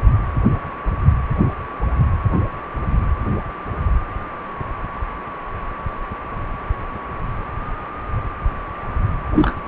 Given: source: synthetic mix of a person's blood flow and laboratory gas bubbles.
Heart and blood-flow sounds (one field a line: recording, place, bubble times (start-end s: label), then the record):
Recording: Doppler ultrasound of blood flow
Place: precordium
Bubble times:
9.34-9.58 s: bubbles
From the record:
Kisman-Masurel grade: 112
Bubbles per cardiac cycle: 1 to 2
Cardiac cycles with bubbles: 1 to 10%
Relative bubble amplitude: moderate (0.250 to 0.450)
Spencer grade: 1 (occasional bubble signal discernible with the cardiac motion signal, with majority of cardiac periods free of bubbles)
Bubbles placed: anywhere in the cardiac cycle